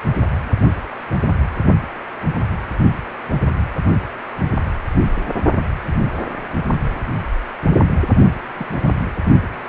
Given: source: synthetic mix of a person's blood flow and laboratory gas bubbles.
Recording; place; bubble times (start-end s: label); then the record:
Doppler ultrasound of blood flow; precordium
8.54-8.66 s: bubbles
8.73-8.96 s: bubbles
From the record:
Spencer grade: 1 (occasional bubble signal discernible with the cardiac motion signal, with majority of cardiac periods free of bubbles); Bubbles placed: only in the low amplitude regions of the cardiac cycle